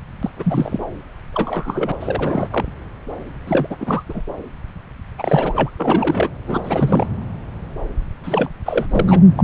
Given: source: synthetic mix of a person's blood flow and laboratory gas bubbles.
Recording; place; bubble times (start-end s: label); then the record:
Doppler ultrasound of blood flow; subclavian vein
0.22-0.30 s: bubbles
0.37-0.83 s: bubbles
1.33-1.92 s: bubbles
1.99-2.66 s: bubbles
3.47-3.67 s: bubbles
3.70-3.77 s: bubbles
3.80-4.04 s: bubbles
4.09-4.22 s: bubbles
5.18-5.70 s: bubbles
5.77-6.29 s: bubbles
6.48-6.61 s: bubbles
6.65-7.06 s: bubbles
8.23-8.49 s: bubbles
8.65-8.86 s: bubbles
8.91-9.20 s: bubbles
9.37-9.44 s: bubbles
From the record:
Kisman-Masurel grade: 332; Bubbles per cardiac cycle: rolling drumbeat, 9 or more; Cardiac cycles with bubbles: 50 to 99%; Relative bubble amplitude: moderate (0.250 to 0.450); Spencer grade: 3 (all of the cardiac periods contain showers or single bubble signals, but not dominating or overriding the cardiac motion signals); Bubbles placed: anywhere in the cardiac cycle